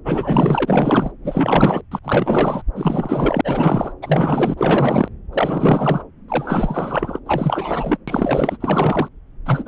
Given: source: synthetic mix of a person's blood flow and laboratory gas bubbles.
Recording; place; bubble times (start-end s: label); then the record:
Doppler ultrasound of blood flow; subclavian vein
0.04-1.12 s: bubbles
1.24-1.81 s: bubbles
1.91-1.99 s: bubbles
2.03-2.62 s: bubbles
2.75-3.41 s: bubbles
3.44-3.92 s: bubbles
4.02-5.08 s: bubbles
5.33-6.03 s: bubbles
6.28-7.20 s: bubbles
7.25-7.97 s: bubbles
8.08-8.58 s: bubbles
8.60-9.09 s: bubbles
9.46-9.67 s: bubbles
From the record:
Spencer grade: 4 (maximum detectable bubble signal sounding continuously throughout systole and diastole of every cardiac period, and overriding the amplitude of the normal cardiac signals); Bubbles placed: anywhere in the cardiac cycle